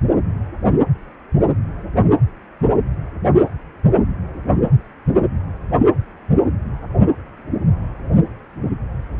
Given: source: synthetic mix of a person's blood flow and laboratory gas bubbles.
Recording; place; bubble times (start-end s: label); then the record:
Doppler ultrasound of blood flow; precordium
no bubbles
From the record:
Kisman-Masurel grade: 000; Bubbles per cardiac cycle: 0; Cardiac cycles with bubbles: 0%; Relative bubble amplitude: no bubbles discernible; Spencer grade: 0 (complete lack of bubble signals)